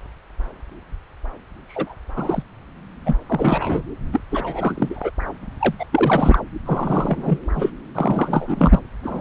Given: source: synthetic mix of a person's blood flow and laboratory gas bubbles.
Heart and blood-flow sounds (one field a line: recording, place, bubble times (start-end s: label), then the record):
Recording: Doppler ultrasound of blood flow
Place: subclavian vein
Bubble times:
1.68-1.94 s: bubbles
2.16-2.42 s: bubbles
3.06-3.16 s: bubbles
3.26-3.82 s: bubbles
4.12-4.20 s: bubbles
4.31-5.11 s: bubbles
5.59-5.74 s: bubbles
5.79-5.85 s: bubbles
5.91-6.39 s: bubbles
6.65-7.39 s: bubbles
7.54-7.70 s: bubbles
7.95-8.79 s: bubbles
9.03-9.21 s: bubbles
From the record:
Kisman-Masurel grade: 233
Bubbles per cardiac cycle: several, 3 to 8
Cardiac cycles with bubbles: 50 to 99%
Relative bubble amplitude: loud (0.450 to 0.775)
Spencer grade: 3 (all of the cardiac periods contain showers or single bubble signals, but not dominating or overriding the cardiac motion signals)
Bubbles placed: anywhere in the cardiac cycle